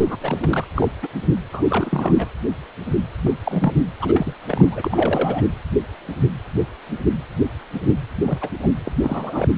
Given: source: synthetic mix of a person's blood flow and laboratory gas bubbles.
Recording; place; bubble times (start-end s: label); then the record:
Doppler ultrasound of blood flow; precordium
0.00-0.17 s: bubbles
0.21-0.66 s: bubbles
0.75-0.88 s: bubbles
1.02-1.08 s: bubbles
1.52-2.27 s: bubbles
3.23-3.32 s: bubbles
3.44-3.73 s: bubbles
3.99-4.33 s: bubbles
4.47-5.43 s: bubbles
8.25-8.38 s: bubbles
8.41-8.50 s: bubbles
8.62-8.68 s: bubbles
8.86-8.92 s: bubbles
9.02-9.49 s: bubbles
From the record:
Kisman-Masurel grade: 232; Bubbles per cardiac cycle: several, 3 to 8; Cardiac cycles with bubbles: 50 to 99%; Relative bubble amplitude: moderate (0.250 to 0.450); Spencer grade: 3 (all of the cardiac periods contain showers or single bubble signals, but not dominating or overriding the cardiac motion signals); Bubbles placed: anywhere in the cardiac cycle